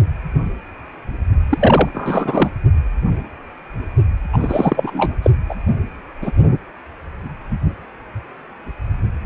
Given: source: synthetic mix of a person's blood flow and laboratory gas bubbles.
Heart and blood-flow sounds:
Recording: Doppler ultrasound of blood flow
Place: precordium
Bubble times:
1.49-1.90 s: bubbles
1.94-2.50 s: bubbles
4.32-4.38 s: bubbles
4.41-5.12 s: bubbles
5.22-5.30 s: bubbles
5.49-5.54 s: bubbles
6.21-6.32 s: bubbles
From the record:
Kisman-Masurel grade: 223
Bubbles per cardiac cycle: several, 3 to 8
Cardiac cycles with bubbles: 10 to 50%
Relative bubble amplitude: loud (0.450 to 0.775)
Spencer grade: 2 (many but less than half of the cardiac periods contain bubble signals, singularly or in groups)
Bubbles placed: only in the low amplitude regions of the cardiac cycle

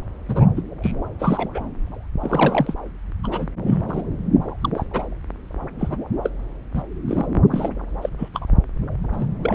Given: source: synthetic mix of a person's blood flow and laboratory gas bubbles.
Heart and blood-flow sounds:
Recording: Doppler ultrasound of blood flow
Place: subclavian vein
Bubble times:
0.28-0.46 s: bubbles
0.56-0.61 s: bubbles
0.82-0.92 s: bubbles
1.19-1.48 s: bubbles
1.54-1.64 s: bubbles
2.21-2.75 s: bubbles
3.23-3.28 s: bubbles
3.31-3.48 s: bubbles
3.66-3.81 s: bubbles
3.87-4.03 s: bubbles
4.61-4.70 s: bubbles
4.74-4.85 s: bubbles
4.93-5.09 s: bubbles
5.79-5.97 s: bubbles
6.23-6.30 s: bubbles
6.74-6.83 s: bubbles
7.07-7.26 s: bubbles
7.50-7.69 s: bubbles
8.02-8.10 s: bubbles
8.18-8.29 s: bubbles
8.33-8.51 s: bubbles
9.13-9.26 s: bubbles
9.42-9.55 s: bubbles
From the record:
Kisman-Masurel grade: 232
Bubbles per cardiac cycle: several, 3 to 8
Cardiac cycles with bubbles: 50 to 99%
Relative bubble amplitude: moderate (0.250 to 0.450)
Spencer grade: 3 (all of the cardiac periods contain showers or single bubble signals, but not dominating or overriding the cardiac motion signals)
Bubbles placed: anywhere in the cardiac cycle

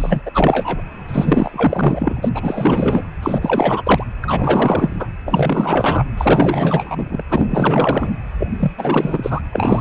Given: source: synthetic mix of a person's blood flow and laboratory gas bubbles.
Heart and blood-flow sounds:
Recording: Doppler ultrasound of blood flow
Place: precordium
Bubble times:
0.00-0.22 s: bubbles
0.26-0.82 s: bubbles
1.08-2.29 s: bubbles
2.34-3.06 s: bubbles
3.23-4.04 s: bubbles
4.21-5.08 s: bubbles
5.25-6.05 s: bubbles
6.17-7.23 s: bubbles
7.29-8.13 s: bubbles
8.39-8.47 s: bubbles
8.59-8.71 s: bubbles
8.78-9.40 s: bubbles
9.52-9.81 s: bubbles
From the record:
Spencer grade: 4 (maximum detectable bubble signal sounding continuously throughout systole and diastole of every cardiac period, and overriding the amplitude of the normal cardiac signals)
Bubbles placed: anywhere in the cardiac cycle

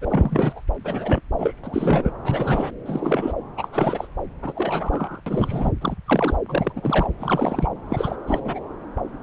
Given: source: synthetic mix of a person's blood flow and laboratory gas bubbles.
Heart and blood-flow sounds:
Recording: Doppler ultrasound of blood flow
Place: subclavian vein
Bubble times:
0.01-0.62 s: bubbles
0.84-1.21 s: bubbles
1.38-1.54 s: bubbles
1.64-2.11 s: bubbles
2.23-2.71 s: bubbles
2.85-3.33 s: bubbles
3.57-3.69 s: bubbles
3.73-4.08 s: bubbles
4.42-5.21 s: bubbles
5.26-5.71 s: bubbles
5.80-5.96 s: bubbles
6.06-6.36 s: bubbles
6.48-6.73 s: bubbles
6.75-7.08 s: bubbles
7.19-7.67 s: bubbles
7.88-8.16 s: bubbles
8.27-8.40 s: bubbles
8.44-8.59 s: bubbles
From the record:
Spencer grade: 3 (all of the cardiac periods contain showers or single bubble signals, but not dominating or overriding the cardiac motion signals)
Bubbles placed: anywhere in the cardiac cycle

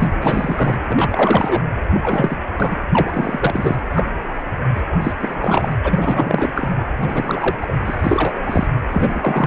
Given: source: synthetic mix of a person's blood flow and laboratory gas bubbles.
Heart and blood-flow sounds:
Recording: Doppler ultrasound of blood flow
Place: precordium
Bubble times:
0.00-0.08 s: bubbles
0.22-0.78 s: bubbles
0.87-1.63 s: bubbles
1.94-2.36 s: bubbles
2.57-2.76 s: bubbles
2.92-3.78 s: bubbles
3.91-4.10 s: bubbles
4.75-4.82 s: bubbles
5.01-5.13 s: bubbles
5.20-5.76 s: bubbles
5.83-6.50 s: bubbles
6.54-6.68 s: bubbles
7.00-7.55 s: bubbles
7.60-7.74 s: bubbles
7.85-8.33 s: bubbles
8.46-8.67 s: bubbles
8.90-9.47 s: bubbles
From the record:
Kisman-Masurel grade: 343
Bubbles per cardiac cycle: rolling drumbeat, 9 or more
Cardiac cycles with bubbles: 100%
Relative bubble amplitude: loud (0.450 to 0.775)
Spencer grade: 3 (all of the cardiac periods contain showers or single bubble signals, but not dominating or overriding the cardiac motion signals)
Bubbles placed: anywhere in the cardiac cycle

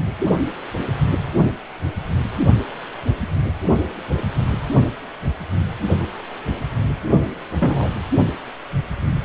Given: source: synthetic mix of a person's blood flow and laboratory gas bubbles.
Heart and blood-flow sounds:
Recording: Doppler ultrasound of blood flow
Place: precordium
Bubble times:
7.59-7.89 s: bubbles
From the record:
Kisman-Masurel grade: 113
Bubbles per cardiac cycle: 1 to 2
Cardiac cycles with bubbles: 1 to 10%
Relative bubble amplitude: loud (0.450 to 0.775)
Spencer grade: 1 (occasional bubble signal discernible with the cardiac motion signal, with majority of cardiac periods free of bubbles)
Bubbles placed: only in the low amplitude regions of the cardiac cycle

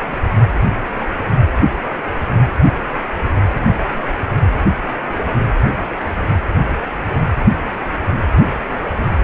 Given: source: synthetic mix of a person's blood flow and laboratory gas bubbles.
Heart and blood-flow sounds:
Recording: Doppler ultrasound of blood flow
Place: precordium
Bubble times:
no bubbles
From the record:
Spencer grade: 0 (complete lack of bubble signals)

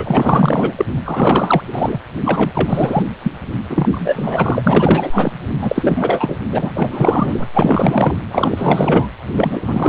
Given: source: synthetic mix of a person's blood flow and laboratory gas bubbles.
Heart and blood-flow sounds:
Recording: Doppler ultrasound of blood flow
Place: precordium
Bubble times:
0.00-0.73 s: bubbles
0.76-0.85 s: bubbles
1.03-1.61 s: bubbles
1.66-1.98 s: bubbles
2.22-3.02 s: bubbles
3.23-3.31 s: bubbles
3.69-5.33 s: bubbles
5.61-6.36 s: bubbles
6.52-7.46 s: bubbles
7.53-8.15 s: bubbles
8.31-9.09 s: bubbles
9.36-9.89 s: bubbles
From the record:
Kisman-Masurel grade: 444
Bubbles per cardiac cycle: continuous sound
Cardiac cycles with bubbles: 100%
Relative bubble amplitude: maximal (0.775 to 0.999)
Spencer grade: 4 (maximum detectable bubble signal sounding continuously throughout systole and diastole of every cardiac period, and overriding the amplitude of the normal cardiac signals)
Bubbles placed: anywhere in the cardiac cycle

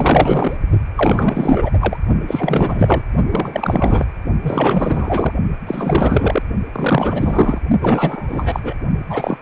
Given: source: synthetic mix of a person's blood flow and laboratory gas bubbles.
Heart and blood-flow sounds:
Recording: Doppler ultrasound of blood flow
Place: precordium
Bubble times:
0.00-0.57 s: bubbles
0.95-1.70 s: bubbles
1.73-1.97 s: bubbles
2.27-3.02 s: bubbles
3.31-4.06 s: bubbles
4.42-5.33 s: bubbles
5.67-6.42 s: bubbles
6.73-7.58 s: bubbles
7.82-8.73 s: bubbles
9.10-9.38 s: bubbles
From the record:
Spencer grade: 4 (maximum detectable bubble signal sounding continuously throughout systole and diastole of every cardiac period, and overriding the amplitude of the normal cardiac signals)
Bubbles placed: only in the low amplitude regions of the cardiac cycle

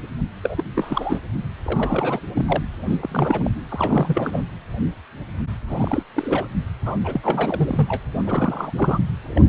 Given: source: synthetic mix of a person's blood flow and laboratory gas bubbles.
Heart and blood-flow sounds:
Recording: Doppler ultrasound of blood flow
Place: precordium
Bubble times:
0.43-0.63 s: bubbles
0.74-1.19 s: bubbles
1.65-2.20 s: bubbles
2.34-2.63 s: bubbles
2.84-2.98 s: bubbles
3.01-3.50 s: bubbles
3.69-4.43 s: bubbles
5.67-6.03 s: bubbles
6.14-6.46 s: bubbles
6.85-6.95 s: bubbles
7.04-7.98 s: bubbles
8.24-8.73 s: bubbles
8.77-8.99 s: bubbles
9.28-9.49 s: bubbles
From the record:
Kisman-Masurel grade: 332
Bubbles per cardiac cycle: rolling drumbeat, 9 or more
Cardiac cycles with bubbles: 50 to 99%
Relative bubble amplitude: moderate (0.250 to 0.450)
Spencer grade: 3 (all of the cardiac periods contain showers or single bubble signals, but not dominating or overriding the cardiac motion signals)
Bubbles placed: anywhere in the cardiac cycle

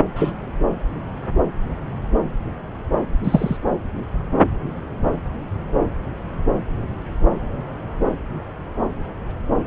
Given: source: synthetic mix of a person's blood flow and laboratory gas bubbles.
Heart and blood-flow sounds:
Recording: Doppler ultrasound of blood flow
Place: subclavian vein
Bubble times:
0.15-0.31 s: bubbles
3.23-3.57 s: bubbles
9.64-9.67 s: bubbles
From the record:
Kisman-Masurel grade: 123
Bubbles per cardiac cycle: 1 to 2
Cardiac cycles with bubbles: 10 to 50%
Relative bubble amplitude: loud (0.450 to 0.775)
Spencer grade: 2 (many but less than half of the cardiac periods contain bubble signals, singularly or in groups)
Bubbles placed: anywhere in the cardiac cycle

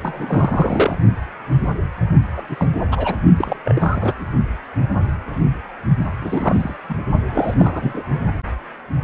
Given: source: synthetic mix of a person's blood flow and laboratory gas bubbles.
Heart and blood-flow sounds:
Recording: Doppler ultrasound of blood flow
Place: precordium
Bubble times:
0.02-0.98 s: bubbles
2.36-2.42 s: bubbles
2.49-2.68 s: bubbles
2.92-3.17 s: bubbles
3.36-3.56 s: bubbles
3.64-4.14 s: bubbles
6.21-6.76 s: bubbles
6.89-6.96 s: bubbles
7.27-8.03 s: bubbles
From the record:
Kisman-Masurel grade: 332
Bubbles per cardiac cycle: rolling drumbeat, 9 or more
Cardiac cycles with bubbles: 50 to 99%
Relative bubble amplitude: moderate (0.250 to 0.450)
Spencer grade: 3 (all of the cardiac periods contain showers or single bubble signals, but not dominating or overriding the cardiac motion signals)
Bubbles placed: only in the low amplitude regions of the cardiac cycle

